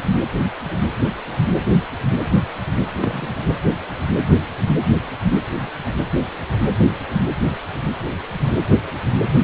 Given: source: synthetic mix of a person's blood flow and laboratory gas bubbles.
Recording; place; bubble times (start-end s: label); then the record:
Doppler ultrasound of blood flow; precordium
3.00-3.36 s: bubbles
From the record:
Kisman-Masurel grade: 112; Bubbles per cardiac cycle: 1 to 2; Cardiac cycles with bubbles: 1 to 10%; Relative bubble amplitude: moderate (0.250 to 0.450); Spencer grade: 1 (occasional bubble signal discernible with the cardiac motion signal, with majority of cardiac periods free of bubbles); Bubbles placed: anywhere in the cardiac cycle